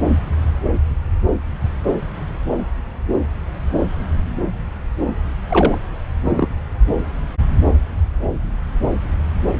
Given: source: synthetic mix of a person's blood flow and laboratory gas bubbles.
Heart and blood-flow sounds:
Doppler ultrasound of blood flow; subclavian vein
5.49-5.78 s: bubbles
6.25-6.47 s: bubbles
From the record:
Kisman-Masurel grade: 213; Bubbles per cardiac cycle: several, 3 to 8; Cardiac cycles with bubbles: 1 to 10%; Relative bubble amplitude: loud (0.450 to 0.775); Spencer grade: 1 (occasional bubble signal discernible with the cardiac motion signal, with majority of cardiac periods free of bubbles); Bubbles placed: anywhere in the cardiac cycle

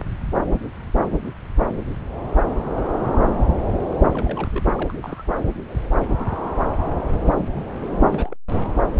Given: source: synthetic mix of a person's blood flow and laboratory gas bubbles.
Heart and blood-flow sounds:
Doppler ultrasound of blood flow; subclavian vein
3.70-4.48 s: bubbles
4.53-4.62 s: bubbles
4.75-4.92 s: bubbles
5.00-5.22 s: bubbles
5.27-5.34 s: bubbles
8.04-8.35 s: bubbles
8.57-8.60 s: bubbles
From the record:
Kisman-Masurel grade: 221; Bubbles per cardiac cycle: several, 3 to 8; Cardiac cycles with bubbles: 10 to 50%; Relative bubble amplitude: barely perceptible (0.100 to 0.250); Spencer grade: 2 (many but less than half of the cardiac periods contain bubble signals, singularly or in groups); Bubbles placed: anywhere in the cardiac cycle

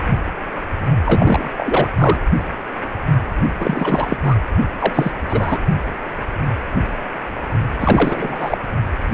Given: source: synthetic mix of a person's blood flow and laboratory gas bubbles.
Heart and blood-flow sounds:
Doppler ultrasound of blood flow; precordium
1.05-1.51 s: bubbles
1.58-1.89 s: bubbles
1.98-2.18 s: bubbles
3.59-4.17 s: bubbles
4.23-4.36 s: bubbles
4.79-5.12 s: bubbles
5.28-5.58 s: bubbles
7.79-8.58 s: bubbles
From the record:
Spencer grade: 3 (all of the cardiac periods contain showers or single bubble signals, but not dominating or overriding the cardiac motion signals); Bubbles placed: only in the low amplitude regions of the cardiac cycle

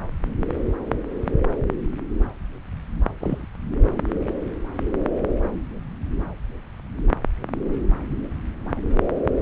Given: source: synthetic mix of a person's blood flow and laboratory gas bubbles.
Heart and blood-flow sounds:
Doppler ultrasound of blood flow; subclavian vein
3.20-3.46 s: bubbles
From the record:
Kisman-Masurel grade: 111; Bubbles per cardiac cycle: 1 to 2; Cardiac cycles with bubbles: 1 to 10%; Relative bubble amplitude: barely perceptible (0.100 to 0.250); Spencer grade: 1 (occasional bubble signal discernible with the cardiac motion signal, with majority of cardiac periods free of bubbles); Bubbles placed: anywhere in the cardiac cycle

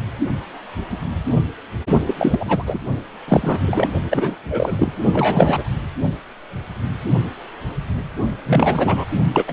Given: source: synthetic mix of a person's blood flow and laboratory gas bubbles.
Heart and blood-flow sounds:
Doppler ultrasound of blood flow; precordium
2.06-2.15 s: bubbles
2.18-2.63 s: bubbles
2.67-2.79 s: bubbles
3.28-3.60 s: bubbles
3.62-3.88 s: bubbles
4.10-4.38 s: bubbles
4.49-5.02 s: bubbles
5.13-5.69 s: bubbles
8.46-9.04 s: bubbles
9.34-9.45 s: bubbles
9.47-9.53 s: bubbles
From the record:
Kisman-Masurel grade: 333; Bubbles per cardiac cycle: rolling drumbeat, 9 or more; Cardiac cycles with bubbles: 50 to 99%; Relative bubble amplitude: loud (0.450 to 0.775); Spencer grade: 3 (all of the cardiac periods contain showers or single bubble signals, but not dominating or overriding the cardiac motion signals); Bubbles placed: only in the low amplitude regions of the cardiac cycle

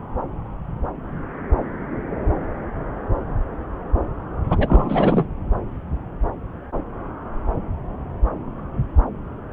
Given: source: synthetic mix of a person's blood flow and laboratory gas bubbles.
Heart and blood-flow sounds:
Doppler ultrasound of blood flow; subclavian vein
4.50-5.27 s: bubbles
From the record:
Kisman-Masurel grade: 223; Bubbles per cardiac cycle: several, 3 to 8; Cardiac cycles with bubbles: 10 to 50%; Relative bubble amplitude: loud (0.450 to 0.775); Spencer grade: 2 (many but less than half of the cardiac periods contain bubble signals, singularly or in groups); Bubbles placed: anywhere in the cardiac cycle

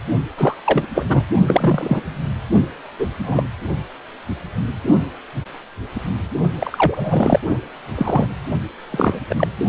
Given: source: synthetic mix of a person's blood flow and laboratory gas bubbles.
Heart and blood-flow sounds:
Doppler ultrasound of blood flow; precordium
0.38-0.56 s: bubbles
0.65-0.87 s: bubbles
0.95-1.24 s: bubbles
1.44-2.01 s: bubbles
2.98-3.07 s: bubbles
3.22-3.48 s: bubbles
6.60-7.39 s: bubbles
7.48-7.58 s: bubbles
7.95-8.34 s: bubbles
8.91-9.20 s: bubbles
9.29-9.47 s: bubbles
From the record:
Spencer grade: 3 (all of the cardiac periods contain showers or single bubble signals, but not dominating or overriding the cardiac motion signals); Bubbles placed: only in the low amplitude regions of the cardiac cycle

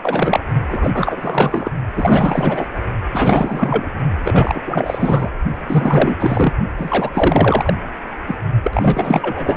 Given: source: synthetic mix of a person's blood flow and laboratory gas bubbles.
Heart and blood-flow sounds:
Doppler ultrasound of blood flow; precordium
0.00-0.40 s: bubbles
0.66-1.71 s: bubbles
1.96-2.67 s: bubbles
3.12-3.90 s: bubbles
4.24-4.62 s: bubbles
4.67-5.30 s: bubbles
5.68-6.16 s: bubbles
6.19-6.53 s: bubbles
6.77-7.10 s: bubbles
7.14-7.73 s: bubbles
8.27-8.36 s: bubbles
8.63-9.57 s: bubbles
From the record:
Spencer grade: 4 (maximum detectable bubble signal sounding continuously throughout systole and diastole of every cardiac period, and overriding the amplitude of the normal cardiac signals); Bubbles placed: only in the low amplitude regions of the cardiac cycle

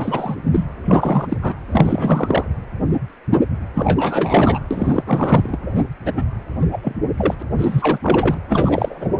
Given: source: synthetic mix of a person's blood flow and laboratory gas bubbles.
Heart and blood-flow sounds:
Doppler ultrasound of blood flow; precordium
0.00-0.35 s: bubbles
0.52-0.65 s: bubbles
0.85-1.37 s: bubbles
1.42-1.54 s: bubbles
1.71-2.50 s: bubbles
3.74-4.59 s: bubbles
4.71-5.03 s: bubbles
5.05-5.57 s: bubbles
6.05-6.12 s: bubbles
6.16-6.24 s: bubbles
6.72-6.99 s: bubbles
7.17-7.34 s: bubbles
7.39-7.43 s: bubbles
7.57-7.98 s: bubbles
8.03-8.39 s: bubbles
8.49-9.10 s: bubbles
From the record:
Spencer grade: 3 (all of the cardiac periods contain showers or single bubble signals, but not dominating or overriding the cardiac motion signals); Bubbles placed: anywhere in the cardiac cycle

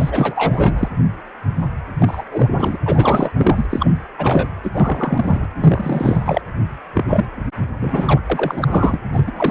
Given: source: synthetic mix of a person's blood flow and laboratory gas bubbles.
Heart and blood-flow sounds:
Doppler ultrasound of blood flow; precordium
0.00-0.89 s: bubbles
2.00-2.24 s: bubbles
2.31-2.77 s: bubbles
2.85-3.31 s: bubbles
3.35-3.66 s: bubbles
3.70-3.91 s: bubbles
4.17-4.50 s: bubbles
4.63-5.48 s: bubbles
5.58-6.42 s: bubbles
6.93-7.25 s: bubbles
7.78-8.20 s: bubbles
8.29-8.99 s: bubbles
9.13-9.23 s: bubbles
9.26-9.31 s: bubbles
9.36-9.51 s: bubbles
From the record:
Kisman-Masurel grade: 333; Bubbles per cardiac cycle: rolling drumbeat, 9 or more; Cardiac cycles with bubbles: 50 to 99%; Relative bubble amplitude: loud (0.450 to 0.775); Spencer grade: 3 (all of the cardiac periods contain showers or single bubble signals, but not dominating or overriding the cardiac motion signals); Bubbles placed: anywhere in the cardiac cycle

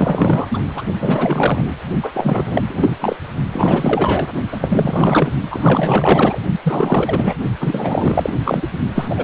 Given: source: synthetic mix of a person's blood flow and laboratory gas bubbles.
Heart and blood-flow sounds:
Doppler ultrasound of blood flow; precordium
0.00-0.47 s: bubbles
0.51-0.60 s: bubbles
0.74-0.86 s: bubbles
1.00-1.64 s: bubbles
2.02-2.62 s: bubbles
2.69-2.95 s: bubbles
3.00-3.16 s: bubbles
3.52-4.29 s: bubbles
4.52-5.32 s: bubbles
5.50-6.39 s: bubbles
6.62-7.35 s: bubbles
7.59-8.32 s: bubbles
8.44-8.67 s: bubbles
8.94-9.24 s: bubbles
From the record:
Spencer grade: 4 (maximum detectable bubble signal sounding continuously throughout systole and diastole of every cardiac period, and overriding the amplitude of the normal cardiac signals); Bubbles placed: only in the low amplitude regions of the cardiac cycle

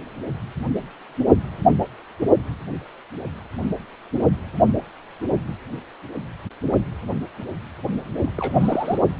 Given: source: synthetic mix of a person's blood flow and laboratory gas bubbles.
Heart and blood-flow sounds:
Doppler ultrasound of blood flow; precordium
8.21-8.32 s: bubbles
8.37-8.98 s: bubbles
From the record:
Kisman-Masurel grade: 221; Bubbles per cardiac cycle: several, 3 to 8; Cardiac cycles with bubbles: 10 to 50%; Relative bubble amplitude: barely perceptible (0.100 to 0.250); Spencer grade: 2 (many but less than half of the cardiac periods contain bubble signals, singularly or in groups); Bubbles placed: only in the low amplitude regions of the cardiac cycle

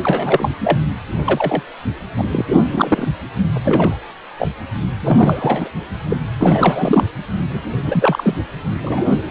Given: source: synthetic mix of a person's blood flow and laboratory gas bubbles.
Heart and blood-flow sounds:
Doppler ultrasound of blood flow; precordium
0.03-0.53 s: bubbles
0.63-0.80 s: bubbles
1.26-1.62 s: bubbles
2.18-2.23 s: bubbles
2.31-2.45 s: bubbles
2.71-3.08 s: bubbles
3.53-3.58 s: bubbles
3.63-3.98 s: bubbles
4.38-4.48 s: bubbles
5.01-5.68 s: bubbles
6.09-6.16 s: bubbles
6.39-7.03 s: bubbles
7.49-7.61 s: bubbles
7.86-8.34 s: bubbles
8.81-9.08 s: bubbles
From the record:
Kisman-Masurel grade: 243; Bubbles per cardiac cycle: several, 3 to 8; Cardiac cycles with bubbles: 100%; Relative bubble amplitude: loud (0.450 to 0.775); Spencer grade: 3 (all of the cardiac periods contain showers or single bubble signals, but not dominating or overriding the cardiac motion signals); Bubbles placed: anywhere in the cardiac cycle

